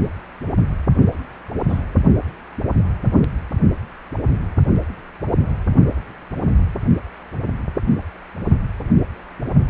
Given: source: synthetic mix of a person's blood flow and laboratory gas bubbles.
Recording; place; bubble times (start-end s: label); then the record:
Doppler ultrasound of blood flow; precordium
1.68-1.82 s: bubbles
From the record:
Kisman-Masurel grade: 112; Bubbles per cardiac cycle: 1 to 2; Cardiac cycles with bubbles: 1 to 10%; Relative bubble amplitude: moderate (0.250 to 0.450); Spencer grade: 1 (occasional bubble signal discernible with the cardiac motion signal, with majority of cardiac periods free of bubbles); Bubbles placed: only in the low amplitude regions of the cardiac cycle